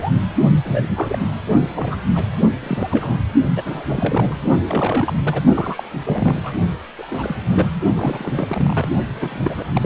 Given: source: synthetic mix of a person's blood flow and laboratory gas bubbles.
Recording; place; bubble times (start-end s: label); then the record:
Doppler ultrasound of blood flow; precordium
0.00-0.14 s: bubbles
0.65-0.92 s: bubbles
0.95-1.18 s: bubbles
1.74-1.99 s: bubbles
2.13-2.36 s: bubbles
2.39-2.49 s: bubbles
2.60-3.20 s: bubbles
3.56-3.83 s: bubbles
3.89-4.38 s: bubbles
4.67-5.13 s: bubbles
5.25-5.42 s: bubbles
5.54-5.83 s: bubbles
6.05-6.53 s: bubbles
6.98-7.36 s: bubbles
7.50-7.68 s: bubbles
7.95-8.88 s: bubbles
9.15-9.63 s: bubbles
9.73-9.86 s: bubbles
From the record:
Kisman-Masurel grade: 342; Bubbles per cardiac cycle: rolling drumbeat, 9 or more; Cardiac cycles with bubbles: 100%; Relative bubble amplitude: moderate (0.250 to 0.450); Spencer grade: 3 (all of the cardiac periods contain showers or single bubble signals, but not dominating or overriding the cardiac motion signals); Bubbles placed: only in the low amplitude regions of the cardiac cycle